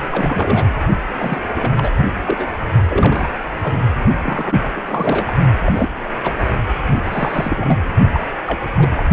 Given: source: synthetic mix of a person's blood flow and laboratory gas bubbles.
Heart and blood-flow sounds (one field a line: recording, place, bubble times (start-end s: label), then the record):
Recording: Doppler ultrasound of blood flow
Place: precordium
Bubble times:
0.11-0.75 s: bubbles
1.19-1.40 s: bubbles
1.55-1.70 s: bubbles
1.76-1.91 s: bubbles
1.96-2.05 s: bubbles
2.26-2.48 s: bubbles
2.88-3.31 s: bubbles
3.44-3.78 s: bubbles
4.22-4.55 s: bubbles
4.76-4.81 s: bubbles
4.87-5.36 s: bubbles
5.66-5.89 s: bubbles
6.04-6.08 s: bubbles
6.23-6.34 s: bubbles
6.90-7.03 s: bubbles
7.06-7.77 s: bubbles
8.14-8.21 s: bubbles
8.46-8.59 s: bubbles
8.75-8.89 s: bubbles
8.96-9.03 s: bubbles
From the record:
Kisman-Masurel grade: 342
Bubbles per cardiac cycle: rolling drumbeat, 9 or more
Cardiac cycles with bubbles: 100%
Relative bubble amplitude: moderate (0.250 to 0.450)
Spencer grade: 3 (all of the cardiac periods contain showers or single bubble signals, but not dominating or overriding the cardiac motion signals)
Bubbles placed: only in the low amplitude regions of the cardiac cycle